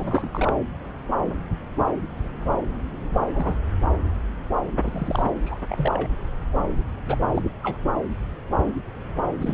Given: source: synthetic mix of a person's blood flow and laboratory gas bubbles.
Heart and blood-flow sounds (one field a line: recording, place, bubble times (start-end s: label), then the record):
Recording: Doppler ultrasound of blood flow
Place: subclavian vein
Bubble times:
0.00-0.52 s: bubbles
3.35-3.58 s: bubbles
4.82-5.30 s: bubbles
5.46-5.59 s: bubbles
5.69-6.08 s: bubbles
7.07-7.18 s: bubbles
7.34-7.50 s: bubbles
7.62-7.78 s: bubbles
9.40-9.54 s: bubbles
From the record:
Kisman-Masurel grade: 221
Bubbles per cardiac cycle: several, 3 to 8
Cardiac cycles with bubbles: 10 to 50%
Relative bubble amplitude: barely perceptible (0.100 to 0.250)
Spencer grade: 2 (many but less than half of the cardiac periods contain bubble signals, singularly or in groups)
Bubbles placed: anywhere in the cardiac cycle